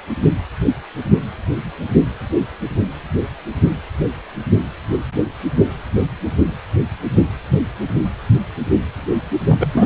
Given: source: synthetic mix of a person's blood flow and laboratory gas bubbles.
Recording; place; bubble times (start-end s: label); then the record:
Doppler ultrasound of blood flow; precordium
9.48-9.71 s: bubbles
9.74-9.85 s: bubbles
From the record:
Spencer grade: 1 (occasional bubble signal discernible with the cardiac motion signal, with majority of cardiac periods free of bubbles); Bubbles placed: only in the low amplitude regions of the cardiac cycle